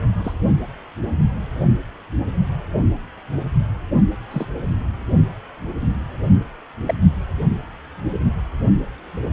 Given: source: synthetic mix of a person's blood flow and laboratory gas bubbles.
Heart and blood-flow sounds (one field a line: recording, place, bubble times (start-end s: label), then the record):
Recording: Doppler ultrasound of blood flow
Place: precordium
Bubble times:
0.24-0.33 s: bubbles
4.30-4.46 s: bubbles
6.86-6.94 s: bubbles
From the record:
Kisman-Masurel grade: 121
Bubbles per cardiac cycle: 1 to 2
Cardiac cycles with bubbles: 10 to 50%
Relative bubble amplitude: barely perceptible (0.100 to 0.250)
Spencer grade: 2 (many but less than half of the cardiac periods contain bubble signals, singularly or in groups)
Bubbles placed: only in the low amplitude regions of the cardiac cycle